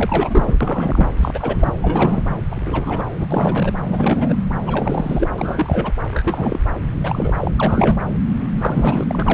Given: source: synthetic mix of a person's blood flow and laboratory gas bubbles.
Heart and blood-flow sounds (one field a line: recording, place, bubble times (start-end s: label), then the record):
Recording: Doppler ultrasound of blood flow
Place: subclavian vein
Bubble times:
0.00-1.07 s: bubbles
1.17-1.73 s: bubbles
1.82-2.23 s: bubbles
2.51-3.05 s: bubbles
3.19-3.26 s: bubbles
3.30-3.74 s: bubbles
3.91-4.36 s: bubbles
4.66-5.28 s: bubbles
5.38-5.92 s: bubbles
6.11-6.59 s: bubbles
7.04-7.50 s: bubbles
7.54-7.99 s: bubbles
8.40-9.04 s: bubbles
9.07-9.34 s: bubbles
From the record:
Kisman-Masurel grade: 342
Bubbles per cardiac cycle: rolling drumbeat, 9 or more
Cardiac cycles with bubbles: 100%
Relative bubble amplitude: moderate (0.250 to 0.450)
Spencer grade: 3 (all of the cardiac periods contain showers or single bubble signals, but not dominating or overriding the cardiac motion signals)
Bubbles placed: anywhere in the cardiac cycle